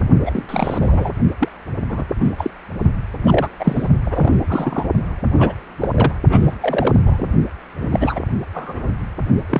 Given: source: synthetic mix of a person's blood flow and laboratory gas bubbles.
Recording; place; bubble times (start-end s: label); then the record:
Doppler ultrasound of blood flow; precordium
0.26-0.43 s: bubbles
0.48-1.13 s: bubbles
1.39-1.48 s: bubbles
1.89-2.04 s: bubbles
2.19-2.33 s: bubbles
2.37-2.50 s: bubbles
3.24-3.49 s: bubbles
3.58-3.89 s: bubbles
4.05-4.86 s: bubbles
5.38-5.55 s: bubbles
5.80-5.88 s: bubbles
5.91-6.12 s: bubbles
6.29-6.54 s: bubbles
6.60-6.95 s: bubbles
7.05-7.31 s: bubbles
7.80-8.20 s: bubbles
8.54-8.90 s: bubbles
9.49-9.60 s: bubbles
From the record:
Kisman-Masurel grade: 242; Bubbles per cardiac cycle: several, 3 to 8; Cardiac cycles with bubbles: 100%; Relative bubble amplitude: moderate (0.250 to 0.450); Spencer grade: 3 (all of the cardiac periods contain showers or single bubble signals, but not dominating or overriding the cardiac motion signals); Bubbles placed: only in the low amplitude regions of the cardiac cycle